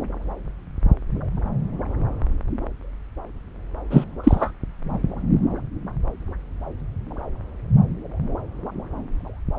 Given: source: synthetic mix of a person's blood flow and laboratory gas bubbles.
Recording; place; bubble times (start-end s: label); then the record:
Doppler ultrasound of blood flow; subclavian vein
3.90-4.04 s: bubbles
4.24-4.51 s: bubbles
From the record:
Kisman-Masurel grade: 213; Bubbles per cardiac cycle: several, 3 to 8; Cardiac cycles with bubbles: 1 to 10%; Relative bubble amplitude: loud (0.450 to 0.775); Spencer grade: 1 (occasional bubble signal discernible with the cardiac motion signal, with majority of cardiac periods free of bubbles); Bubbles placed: anywhere in the cardiac cycle